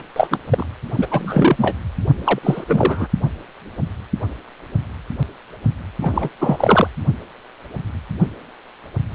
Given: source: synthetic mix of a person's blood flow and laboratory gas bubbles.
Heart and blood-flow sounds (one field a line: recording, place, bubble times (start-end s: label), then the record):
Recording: Doppler ultrasound of blood flow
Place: precordium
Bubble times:
0.00-0.03 s: bubbles
0.16-0.27 s: bubbles
0.30-0.39 s: bubbles
0.50-0.67 s: bubbles
0.95-1.76 s: bubbles
2.24-2.39 s: bubbles
2.43-2.64 s: bubbles
2.68-3.08 s: bubbles
6.00-6.29 s: bubbles
6.38-6.87 s: bubbles
From the record:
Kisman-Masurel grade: 333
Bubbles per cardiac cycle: rolling drumbeat, 9 or more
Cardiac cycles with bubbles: 50 to 99%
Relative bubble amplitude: loud (0.450 to 0.775)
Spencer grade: 3 (all of the cardiac periods contain showers or single bubble signals, but not dominating or overriding the cardiac motion signals)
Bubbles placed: anywhere in the cardiac cycle